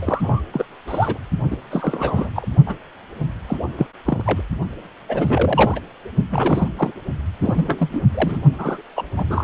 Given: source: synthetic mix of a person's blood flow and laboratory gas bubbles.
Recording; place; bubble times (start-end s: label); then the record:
Doppler ultrasound of blood flow; precordium
0.01-0.41 s: bubbles
0.51-0.65 s: bubbles
0.88-1.18 s: bubbles
1.51-1.56 s: bubbles
1.71-2.29 s: bubbles
2.35-2.48 s: bubbles
2.66-2.75 s: bubbles
3.48-3.58 s: bubbles
3.77-3.87 s: bubbles
4.05-4.42 s: bubbles
5.08-5.80 s: bubbles
6.31-6.71 s: bubbles
6.76-6.92 s: bubbles
7.42-7.89 s: bubbles
7.92-8.02 s: bubbles
8.14-8.38 s: bubbles
8.58-8.82 s: bubbles
8.96-9.03 s: bubbles
9.15-9.44 s: bubbles
From the record:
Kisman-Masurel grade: 342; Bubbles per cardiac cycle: rolling drumbeat, 9 or more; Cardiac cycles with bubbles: 100%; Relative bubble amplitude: moderate (0.250 to 0.450); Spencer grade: 3 (all of the cardiac periods contain showers or single bubble signals, but not dominating or overriding the cardiac motion signals); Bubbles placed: only in the low amplitude regions of the cardiac cycle